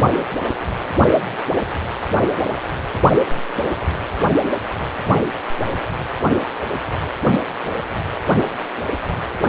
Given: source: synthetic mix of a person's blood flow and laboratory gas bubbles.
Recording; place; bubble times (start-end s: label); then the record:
Doppler ultrasound of blood flow; precordium
no bubbles
From the record:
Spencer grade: 0 (complete lack of bubble signals)